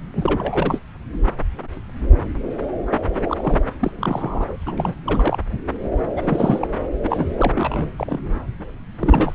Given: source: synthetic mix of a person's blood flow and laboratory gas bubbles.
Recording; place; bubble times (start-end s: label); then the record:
Doppler ultrasound of blood flow; subclavian vein
0.14-0.80 s: bubbles
3.28-3.58 s: bubbles
3.79-3.91 s: bubbles
4.00-4.57 s: bubbles
4.66-4.95 s: bubbles
5.06-5.37 s: bubbles
6.17-6.68 s: bubbles
7.04-7.33 s: bubbles
7.37-7.52 s: bubbles
7.54-7.91 s: bubbles
7.96-8.19 s: bubbles
9.00-9.34 s: bubbles
From the record:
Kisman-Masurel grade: 332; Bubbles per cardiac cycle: rolling drumbeat, 9 or more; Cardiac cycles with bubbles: 50 to 99%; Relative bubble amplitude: moderate (0.250 to 0.450); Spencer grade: 3 (all of the cardiac periods contain showers or single bubble signals, but not dominating or overriding the cardiac motion signals); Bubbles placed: anywhere in the cardiac cycle